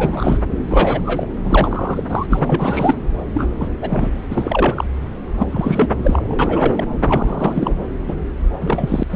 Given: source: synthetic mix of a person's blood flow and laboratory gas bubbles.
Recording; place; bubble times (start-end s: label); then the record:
Doppler ultrasound of blood flow; subclavian vein
0.00-0.38 s: bubbles
0.68-1.32 s: bubbles
1.44-2.03 s: bubbles
2.09-2.26 s: bubbles
2.29-2.95 s: bubbles
3.34-3.49 s: bubbles
3.59-3.68 s: bubbles
3.81-4.09 s: bubbles
4.30-4.85 s: bubbles
5.38-5.46 s: bubbles
5.52-5.88 s: bubbles
6.04-6.35 s: bubbles
6.39-6.84 s: bubbles
7.02-7.77 s: bubbles
8.08-8.14 s: bubbles
8.61-9.04 s: bubbles
9.10-9.16 s: bubbles
From the record:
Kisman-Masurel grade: 343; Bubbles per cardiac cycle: rolling drumbeat, 9 or more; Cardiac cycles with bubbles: 100%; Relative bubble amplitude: loud (0.450 to 0.775); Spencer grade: 3 (all of the cardiac periods contain showers or single bubble signals, but not dominating or overriding the cardiac motion signals); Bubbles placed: anywhere in the cardiac cycle